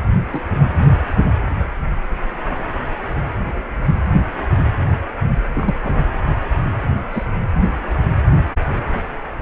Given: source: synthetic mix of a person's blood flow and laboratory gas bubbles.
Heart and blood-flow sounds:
Doppler ultrasound of blood flow; precordium
0.32-0.41 s: bubbles
5.53-5.75 s: bubbles
5.83-6.05 s: bubbles
7.12-7.24 s: bubbles
From the record:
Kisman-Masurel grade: 122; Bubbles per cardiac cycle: 1 to 2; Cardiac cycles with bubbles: 10 to 50%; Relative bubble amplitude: moderate (0.250 to 0.450); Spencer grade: 2 (many but less than half of the cardiac periods contain bubble signals, singularly or in groups); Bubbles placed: anywhere in the cardiac cycle

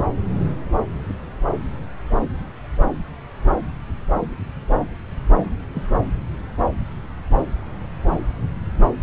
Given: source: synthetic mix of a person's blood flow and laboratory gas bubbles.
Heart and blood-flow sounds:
Doppler ultrasound of blood flow; subclavian vein
5.38-5.43 s: bubbles
5.73-5.83 s: bubbles
From the record:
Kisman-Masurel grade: 111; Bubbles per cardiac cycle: 1 to 2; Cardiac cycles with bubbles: 1 to 10%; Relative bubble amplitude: barely perceptible (0.100 to 0.250); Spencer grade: 1 (occasional bubble signal discernible with the cardiac motion signal, with majority of cardiac periods free of bubbles); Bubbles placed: anywhere in the cardiac cycle

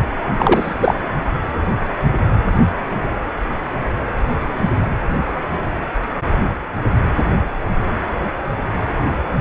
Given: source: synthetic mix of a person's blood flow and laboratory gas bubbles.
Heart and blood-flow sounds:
Doppler ultrasound of blood flow; precordium
0.38-0.74 s: bubbles
0.79-0.95 s: bubbles
From the record:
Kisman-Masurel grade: 213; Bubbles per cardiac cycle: several, 3 to 8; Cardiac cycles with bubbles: 1 to 10%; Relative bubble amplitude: loud (0.450 to 0.775); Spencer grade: 1 (occasional bubble signal discernible with the cardiac motion signal, with majority of cardiac periods free of bubbles); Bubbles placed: anywhere in the cardiac cycle

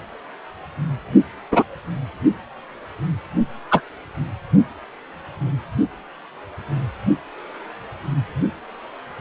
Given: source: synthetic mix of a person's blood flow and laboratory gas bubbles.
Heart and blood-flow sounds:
Doppler ultrasound of blood flow; precordium
1.51-1.63 s: bubbles
3.71-3.81 s: bubbles
From the record:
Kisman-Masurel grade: 123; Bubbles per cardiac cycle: 1 to 2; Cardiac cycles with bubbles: 10 to 50%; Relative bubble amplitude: loud (0.450 to 0.775); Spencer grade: 2 (many but less than half of the cardiac periods contain bubble signals, singularly or in groups); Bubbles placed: only in the low amplitude regions of the cardiac cycle

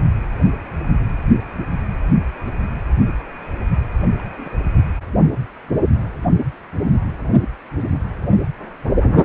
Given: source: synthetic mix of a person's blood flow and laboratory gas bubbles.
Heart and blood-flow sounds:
Doppler ultrasound of blood flow; precordium
4.19-4.22 s: bubbles
4.37-4.50 s: bubbles
4.74-4.83 s: bubbles
From the record:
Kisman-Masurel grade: 211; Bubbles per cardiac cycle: several, 3 to 8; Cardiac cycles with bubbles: 1 to 10%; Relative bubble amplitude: barely perceptible (0.100 to 0.250); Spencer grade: 1 (occasional bubble signal discernible with the cardiac motion signal, with majority of cardiac periods free of bubbles); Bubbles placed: anywhere in the cardiac cycle

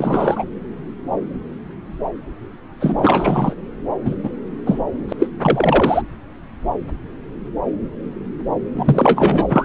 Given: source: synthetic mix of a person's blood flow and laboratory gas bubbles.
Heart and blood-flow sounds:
Doppler ultrasound of blood flow; subclavian vein
0.00-0.44 s: bubbles
2.80-3.55 s: bubbles
4.04-4.15 s: bubbles
4.22-4.29 s: bubbles
4.66-4.79 s: bubbles
5.08-5.12 s: bubbles
5.19-5.27 s: bubbles
5.42-6.02 s: bubbles
8.74-9.65 s: bubbles
From the record:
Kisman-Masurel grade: 233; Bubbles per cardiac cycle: several, 3 to 8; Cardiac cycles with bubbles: 50 to 99%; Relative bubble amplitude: loud (0.450 to 0.775); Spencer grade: 3 (all of the cardiac periods contain showers or single bubble signals, but not dominating or overriding the cardiac motion signals); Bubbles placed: anywhere in the cardiac cycle

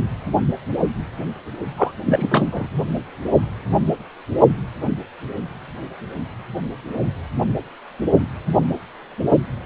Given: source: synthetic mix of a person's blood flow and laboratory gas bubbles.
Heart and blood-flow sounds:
Doppler ultrasound of blood flow; precordium
1.77-1.92 s: bubbles
2.06-2.27 s: bubbles
2.30-2.70 s: bubbles
From the record:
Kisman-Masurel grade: 213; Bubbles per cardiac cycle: several, 3 to 8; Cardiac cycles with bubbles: 1 to 10%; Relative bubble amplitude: loud (0.450 to 0.775); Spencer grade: 1 (occasional bubble signal discernible with the cardiac motion signal, with majority of cardiac periods free of bubbles); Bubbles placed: only in the low amplitude regions of the cardiac cycle

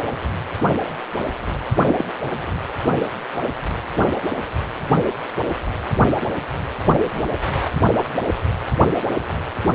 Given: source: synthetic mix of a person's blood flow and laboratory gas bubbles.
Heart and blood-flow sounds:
Doppler ultrasound of blood flow; precordium
1.86-2.05 s: bubbles
From the record:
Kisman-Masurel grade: 113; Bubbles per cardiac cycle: 1 to 2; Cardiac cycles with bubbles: 1 to 10%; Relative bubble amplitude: loud (0.450 to 0.775); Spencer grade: 1 (occasional bubble signal discernible with the cardiac motion signal, with majority of cardiac periods free of bubbles); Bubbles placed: anywhere in the cardiac cycle

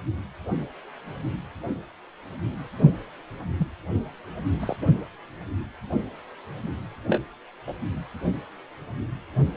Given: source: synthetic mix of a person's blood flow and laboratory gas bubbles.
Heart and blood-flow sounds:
Doppler ultrasound of blood flow; precordium
3.58-3.67 s: bubbles
4.59-4.76 s: bubbles
4.81-4.85 s: bubbles
7.07-7.21 s: bubbles
7.67-7.74 s: bubbles
From the record:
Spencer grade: 2 (many but less than half of the cardiac periods contain bubble signals, singularly or in groups); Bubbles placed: anywhere in the cardiac cycle

